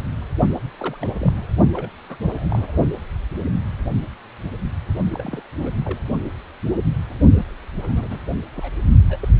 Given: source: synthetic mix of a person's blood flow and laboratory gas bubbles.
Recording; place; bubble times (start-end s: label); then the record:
Doppler ultrasound of blood flow; precordium
0.78-0.97 s: bubbles
1.01-1.07 s: bubbles
1.19-1.32 s: bubbles
1.72-1.89 s: bubbles
2.09-2.16 s: bubbles
2.31-2.72 s: bubbles
5.11-5.42 s: bubbles
5.59-5.69 s: bubbles
5.84-6.00 s: bubbles
7.36-7.44 s: bubbles
7.82-8.20 s: bubbles
8.54-8.71 s: bubbles
9.09-9.29 s: bubbles
From the record:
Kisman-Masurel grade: 221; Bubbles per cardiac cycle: several, 3 to 8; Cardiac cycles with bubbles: 10 to 50%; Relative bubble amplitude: barely perceptible (0.100 to 0.250); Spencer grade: 2 (many but less than half of the cardiac periods contain bubble signals, singularly or in groups); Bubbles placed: only in the low amplitude regions of the cardiac cycle